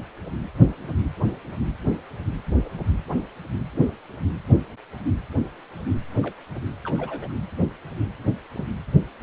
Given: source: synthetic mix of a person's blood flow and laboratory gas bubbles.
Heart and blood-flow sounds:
Doppler ultrasound of blood flow; precordium
6.23-6.34 s: bubbles
6.85-7.33 s: bubbles
7.61-7.65 s: bubbles
8.54-8.64 s: bubbles
From the record:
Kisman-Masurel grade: 121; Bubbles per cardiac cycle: 1 to 2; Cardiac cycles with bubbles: 10 to 50%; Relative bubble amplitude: barely perceptible (0.100 to 0.250); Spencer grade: 2 (many but less than half of the cardiac periods contain bubble signals, singularly or in groups); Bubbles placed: anywhere in the cardiac cycle

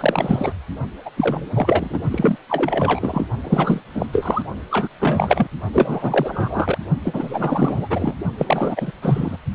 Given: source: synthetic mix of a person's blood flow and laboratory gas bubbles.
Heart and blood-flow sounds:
Doppler ultrasound of blood flow; precordium
0.00-0.53 s: bubbles
1.05-1.10 s: bubbles
1.17-1.48 s: bubbles
1.54-2.00 s: bubbles
2.10-2.37 s: bubbles
2.48-3.26 s: bubbles
3.44-3.80 s: bubbles
3.94-4.06 s: bubbles
4.12-4.42 s: bubbles
4.70-4.88 s: bubbles
4.99-5.47 s: bubbles
5.72-6.78 s: bubbles
7.04-8.16 s: bubbles
8.38-8.91 s: bubbles
9.02-9.37 s: bubbles
From the record:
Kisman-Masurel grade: 343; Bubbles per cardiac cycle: rolling drumbeat, 9 or more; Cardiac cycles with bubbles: 100%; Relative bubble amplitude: loud (0.450 to 0.775); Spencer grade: 3 (all of the cardiac periods contain showers or single bubble signals, but not dominating or overriding the cardiac motion signals); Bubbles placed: only in the low amplitude regions of the cardiac cycle

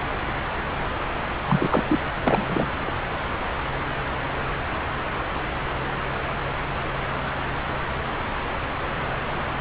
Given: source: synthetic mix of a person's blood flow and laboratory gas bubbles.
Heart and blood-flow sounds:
Doppler ultrasound of blood flow; subclavian vein
1.47-1.83 s: bubbles
1.88-1.99 s: bubbles
2.25-2.92 s: bubbles
From the record:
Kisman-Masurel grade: 222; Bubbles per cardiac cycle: several, 3 to 8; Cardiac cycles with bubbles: 10 to 50%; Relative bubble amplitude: moderate (0.250 to 0.450); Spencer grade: 2 (many but less than half of the cardiac periods contain bubble signals, singularly or in groups); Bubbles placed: anywhere in the cardiac cycle

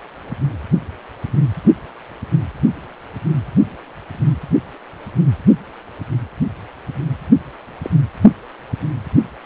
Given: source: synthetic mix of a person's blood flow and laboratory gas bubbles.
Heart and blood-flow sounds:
Doppler ultrasound of blood flow; precordium
7.83-7.90 s: bubbles
From the record:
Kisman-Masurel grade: 112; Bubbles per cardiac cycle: 1 to 2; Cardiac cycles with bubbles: 1 to 10%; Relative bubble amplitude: moderate (0.250 to 0.450); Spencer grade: 1 (occasional bubble signal discernible with the cardiac motion signal, with majority of cardiac periods free of bubbles); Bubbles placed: anywhere in the cardiac cycle

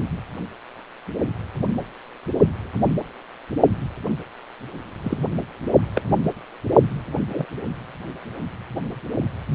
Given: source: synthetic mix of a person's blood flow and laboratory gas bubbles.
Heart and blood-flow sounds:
Doppler ultrasound of blood flow; precordium
5.03-5.17 s: bubbles
5.95-6.01 s: bubbles
7.29-7.46 s: bubbles
From the record:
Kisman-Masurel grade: 122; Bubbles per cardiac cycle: 1 to 2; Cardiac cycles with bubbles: 10 to 50%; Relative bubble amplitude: moderate (0.250 to 0.450); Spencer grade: 2 (many but less than half of the cardiac periods contain bubble signals, singularly or in groups); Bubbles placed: only in the low amplitude regions of the cardiac cycle

